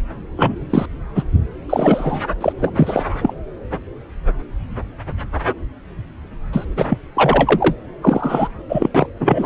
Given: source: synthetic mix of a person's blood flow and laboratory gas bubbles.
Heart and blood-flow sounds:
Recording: Doppler ultrasound of blood flow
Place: subclavian vein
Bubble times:
0.36-0.56 s: bubbles
0.69-0.86 s: bubbles
1.15-1.23 s: bubbles
1.69-2.21 s: bubbles
2.41-2.52 s: bubbles
2.58-3.03 s: bubbles
3.22-3.33 s: bubbles
6.52-6.66 s: bubbles
6.70-6.87 s: bubbles
6.89-6.98 s: bubbles
7.15-7.75 s: bubbles
8.02-8.48 s: bubbles
8.69-8.88 s: bubbles
8.94-9.07 s: bubbles
9.19-9.46 s: bubbles
From the record:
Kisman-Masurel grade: 233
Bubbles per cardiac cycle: several, 3 to 8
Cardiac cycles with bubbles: 50 to 99%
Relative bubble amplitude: loud (0.450 to 0.775)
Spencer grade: 3 (all of the cardiac periods contain showers or single bubble signals, but not dominating or overriding the cardiac motion signals)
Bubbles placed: anywhere in the cardiac cycle

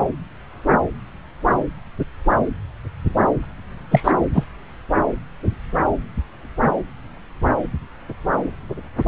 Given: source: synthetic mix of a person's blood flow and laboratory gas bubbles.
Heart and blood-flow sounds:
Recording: Doppler ultrasound of blood flow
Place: subclavian vein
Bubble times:
3.91-4.12 s: bubbles
4.32-4.44 s: bubbles
From the record:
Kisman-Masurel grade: 213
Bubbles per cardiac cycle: several, 3 to 8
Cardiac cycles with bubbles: 1 to 10%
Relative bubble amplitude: loud (0.450 to 0.775)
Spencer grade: 1 (occasional bubble signal discernible with the cardiac motion signal, with majority of cardiac periods free of bubbles)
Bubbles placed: anywhere in the cardiac cycle

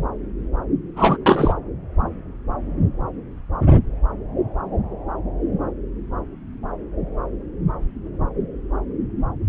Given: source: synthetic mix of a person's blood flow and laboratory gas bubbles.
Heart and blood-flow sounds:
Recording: Doppler ultrasound of blood flow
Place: subclavian vein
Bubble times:
0.96-1.17 s: bubbles
1.26-1.54 s: bubbles
From the record:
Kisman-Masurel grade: 213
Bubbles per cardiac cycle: several, 3 to 8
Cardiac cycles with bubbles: 1 to 10%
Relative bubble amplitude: loud (0.450 to 0.775)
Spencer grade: 1 (occasional bubble signal discernible with the cardiac motion signal, with majority of cardiac periods free of bubbles)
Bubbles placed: anywhere in the cardiac cycle

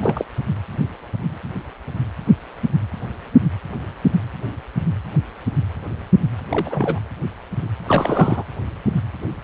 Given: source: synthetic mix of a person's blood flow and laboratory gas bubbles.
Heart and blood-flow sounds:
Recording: Doppler ultrasound of blood flow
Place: precordium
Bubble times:
0.00-0.26 s: bubbles
6.50-6.99 s: bubbles
7.86-8.43 s: bubbles
From the record:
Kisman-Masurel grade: 222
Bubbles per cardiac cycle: several, 3 to 8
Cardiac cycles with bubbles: 10 to 50%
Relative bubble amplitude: moderate (0.250 to 0.450)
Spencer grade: 2 (many but less than half of the cardiac periods contain bubble signals, singularly or in groups)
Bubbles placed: anywhere in the cardiac cycle

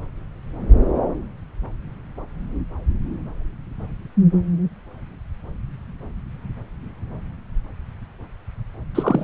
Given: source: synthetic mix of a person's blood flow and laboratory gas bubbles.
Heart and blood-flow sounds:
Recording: Doppler ultrasound of blood flow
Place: subclavian vein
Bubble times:
8.95-9.24 s: bubbles
From the record:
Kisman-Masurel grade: 212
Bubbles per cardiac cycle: several, 3 to 8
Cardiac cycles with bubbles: 1 to 10%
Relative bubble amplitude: moderate (0.250 to 0.450)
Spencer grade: 1 (occasional bubble signal discernible with the cardiac motion signal, with majority of cardiac periods free of bubbles)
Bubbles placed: anywhere in the cardiac cycle

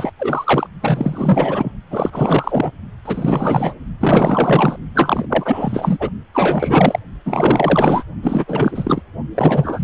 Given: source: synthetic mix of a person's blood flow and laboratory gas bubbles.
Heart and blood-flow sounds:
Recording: Doppler ultrasound of blood flow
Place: precordium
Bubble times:
0.00-0.13 s: bubbles
0.19-0.67 s: bubbles
0.82-1.72 s: bubbles
1.91-2.71 s: bubbles
3.05-3.74 s: bubbles
4.00-4.77 s: bubbles
4.94-5.27 s: bubbles
5.29-6.09 s: bubbles
6.33-6.99 s: bubbles
7.25-8.03 s: bubbles
8.22-9.02 s: bubbles
9.35-9.84 s: bubbles
From the record:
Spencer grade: 4 (maximum detectable bubble signal sounding continuously throughout systole and diastole of every cardiac period, and overriding the amplitude of the normal cardiac signals)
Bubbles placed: only in the low amplitude regions of the cardiac cycle

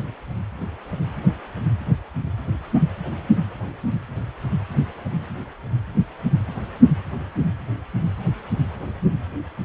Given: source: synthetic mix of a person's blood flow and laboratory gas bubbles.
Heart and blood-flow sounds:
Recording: Doppler ultrasound of blood flow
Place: precordium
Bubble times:
no bubbles
From the record:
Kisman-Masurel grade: 000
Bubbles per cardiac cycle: 0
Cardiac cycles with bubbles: 0%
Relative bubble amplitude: no bubbles discernible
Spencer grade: 0 (complete lack of bubble signals)

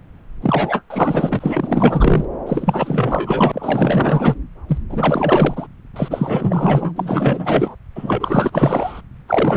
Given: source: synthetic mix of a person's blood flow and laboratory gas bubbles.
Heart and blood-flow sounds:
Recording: Doppler ultrasound of blood flow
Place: subclavian vein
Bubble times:
0.42-0.83 s: bubbles
0.90-2.25 s: bubbles
2.46-4.35 s: bubbles
4.68-4.80 s: bubbles
4.89-5.67 s: bubbles
5.96-6.92 s: bubbles
6.96-7.75 s: bubbles
7.95-9.01 s: bubbles
9.28-9.57 s: bubbles
From the record:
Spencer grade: 4 (maximum detectable bubble signal sounding continuously throughout systole and diastole of every cardiac period, and overriding the amplitude of the normal cardiac signals)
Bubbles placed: anywhere in the cardiac cycle

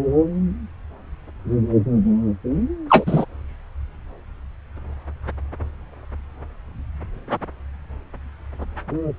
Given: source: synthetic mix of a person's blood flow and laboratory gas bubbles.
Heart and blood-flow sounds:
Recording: Doppler ultrasound of blood flow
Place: subclavian vein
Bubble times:
2.89-3.25 s: bubbles
From the record:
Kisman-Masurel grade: 113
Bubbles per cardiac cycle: 1 to 2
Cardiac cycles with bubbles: 1 to 10%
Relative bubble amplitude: loud (0.450 to 0.775)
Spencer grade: 1 (occasional bubble signal discernible with the cardiac motion signal, with majority of cardiac periods free of bubbles)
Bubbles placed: anywhere in the cardiac cycle

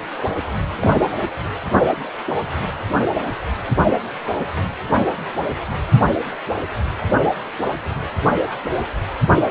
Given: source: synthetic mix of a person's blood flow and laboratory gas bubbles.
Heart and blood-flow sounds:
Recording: Doppler ultrasound of blood flow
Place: precordium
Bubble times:
0.71-1.07 s: bubbles
From the record:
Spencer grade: 1 (occasional bubble signal discernible with the cardiac motion signal, with majority of cardiac periods free of bubbles)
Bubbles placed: anywhere in the cardiac cycle

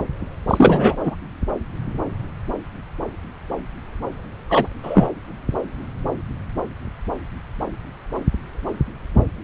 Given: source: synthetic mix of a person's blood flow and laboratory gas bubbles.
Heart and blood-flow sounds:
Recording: Doppler ultrasound of blood flow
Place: subclavian vein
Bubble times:
0.48-0.97 s: bubbles
1.04-1.16 s: bubbles
4.49-4.67 s: bubbles
4.83-5.08 s: bubbles
From the record:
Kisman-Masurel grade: 223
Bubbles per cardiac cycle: several, 3 to 8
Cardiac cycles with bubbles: 10 to 50%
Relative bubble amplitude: loud (0.450 to 0.775)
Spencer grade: 2 (many but less than half of the cardiac periods contain bubble signals, singularly or in groups)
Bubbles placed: anywhere in the cardiac cycle

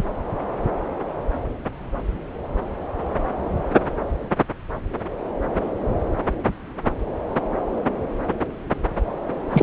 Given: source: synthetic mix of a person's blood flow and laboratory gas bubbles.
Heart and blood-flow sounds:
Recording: Doppler ultrasound of blood flow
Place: subclavian vein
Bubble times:
9.50-9.63 s: bubbles
From the record:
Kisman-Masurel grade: 213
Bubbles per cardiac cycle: several, 3 to 8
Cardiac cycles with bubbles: 1 to 10%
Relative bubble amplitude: loud (0.450 to 0.775)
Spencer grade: 1 (occasional bubble signal discernible with the cardiac motion signal, with majority of cardiac periods free of bubbles)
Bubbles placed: anywhere in the cardiac cycle

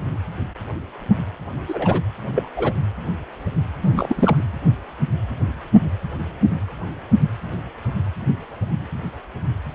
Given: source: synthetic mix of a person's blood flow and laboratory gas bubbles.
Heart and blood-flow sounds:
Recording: Doppler ultrasound of blood flow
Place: precordium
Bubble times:
1.68-2.03 s: bubbles
2.35-2.50 s: bubbles
2.56-2.74 s: bubbles
3.81-4.47 s: bubbles
From the record:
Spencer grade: 2 (many but less than half of the cardiac periods contain bubble signals, singularly or in groups)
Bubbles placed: anywhere in the cardiac cycle

